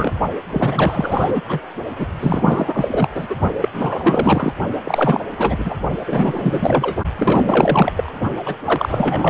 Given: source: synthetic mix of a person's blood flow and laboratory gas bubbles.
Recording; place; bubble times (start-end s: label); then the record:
Doppler ultrasound of blood flow; precordium
0.00-0.13 s: bubbles
0.52-1.42 s: bubbles
1.48-1.60 s: bubbles
1.99-2.07 s: bubbles
2.20-2.89 s: bubbles
2.91-3.08 s: bubbles
3.15-3.35 s: bubbles
3.60-3.69 s: bubbles
3.73-4.52 s: bubbles
4.84-5.25 s: bubbles
5.38-5.75 s: bubbles
6.06-6.96 s: bubbles
7.17-7.92 s: bubbles
7.96-8.12 s: bubbles
8.46-8.55 s: bubbles
8.65-9.30 s: bubbles
From the record:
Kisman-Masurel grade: 444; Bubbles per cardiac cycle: continuous sound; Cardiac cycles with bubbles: 100%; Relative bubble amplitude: maximal (0.775 to 0.999); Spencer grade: 4 (maximum detectable bubble signal sounding continuously throughout systole and diastole of every cardiac period, and overriding the amplitude of the normal cardiac signals); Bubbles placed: only in the low amplitude regions of the cardiac cycle